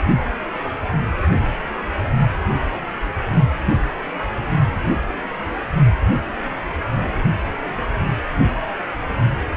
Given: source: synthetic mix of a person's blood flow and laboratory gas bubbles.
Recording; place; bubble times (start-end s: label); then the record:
Doppler ultrasound of blood flow; precordium
no bubbles
From the record:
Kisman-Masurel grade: 000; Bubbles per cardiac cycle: 0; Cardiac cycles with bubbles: 0%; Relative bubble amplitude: no bubbles discernible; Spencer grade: 0 (complete lack of bubble signals)